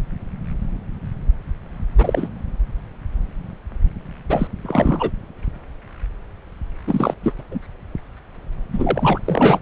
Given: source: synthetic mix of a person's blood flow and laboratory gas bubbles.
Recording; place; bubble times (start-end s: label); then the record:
Doppler ultrasound of blood flow; subclavian vein
1.98-2.28 s: bubbles
4.29-4.47 s: bubbles
4.63-5.11 s: bubbles
6.87-7.14 s: bubbles
7.23-7.32 s: bubbles
7.39-7.42 s: bubbles
7.51-7.60 s: bubbles
8.72-9.20 s: bubbles
9.25-9.59 s: bubbles
From the record:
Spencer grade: 2 (many but less than half of the cardiac periods contain bubble signals, singularly or in groups); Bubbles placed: anywhere in the cardiac cycle